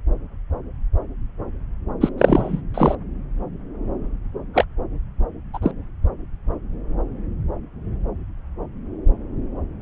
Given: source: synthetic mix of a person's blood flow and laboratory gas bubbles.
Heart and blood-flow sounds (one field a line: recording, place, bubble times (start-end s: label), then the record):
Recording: Doppler ultrasound of blood flow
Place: subclavian vein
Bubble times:
2.01-2.09 s: bubbles
2.18-2.62 s: bubbles
2.74-2.95 s: bubbles
4.53-4.65 s: bubbles
5.53-5.59 s: bubbles
5.62-5.71 s: bubbles
From the record:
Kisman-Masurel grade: 223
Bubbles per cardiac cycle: several, 3 to 8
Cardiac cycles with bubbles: 10 to 50%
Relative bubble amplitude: loud (0.450 to 0.775)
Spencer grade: 2 (many but less than half of the cardiac periods contain bubble signals, singularly or in groups)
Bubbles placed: anywhere in the cardiac cycle